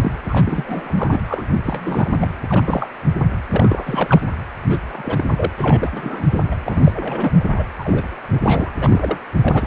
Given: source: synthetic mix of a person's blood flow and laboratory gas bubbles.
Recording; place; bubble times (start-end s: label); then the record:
Doppler ultrasound of blood flow; precordium
0.00-0.12 s: bubbles
0.29-1.20 s: bubbles
1.27-1.61 s: bubbles
1.65-2.29 s: bubbles
2.48-2.88 s: bubbles
3.52-4.21 s: bubbles
4.70-4.78 s: bubbles
4.88-5.50 s: bubbles
5.57-6.24 s: bubbles
6.30-6.45 s: bubbles
6.51-6.58 s: bubbles
6.63-7.45 s: bubbles
7.55-7.64 s: bubbles
7.79-8.05 s: bubbles
8.30-8.71 s: bubbles
8.79-9.18 s: bubbles
9.43-9.67 s: bubbles
From the record:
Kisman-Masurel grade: 342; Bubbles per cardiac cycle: rolling drumbeat, 9 or more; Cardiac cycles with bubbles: 100%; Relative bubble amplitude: moderate (0.250 to 0.450); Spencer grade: 3 (all of the cardiac periods contain showers or single bubble signals, but not dominating or overriding the cardiac motion signals); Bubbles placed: anywhere in the cardiac cycle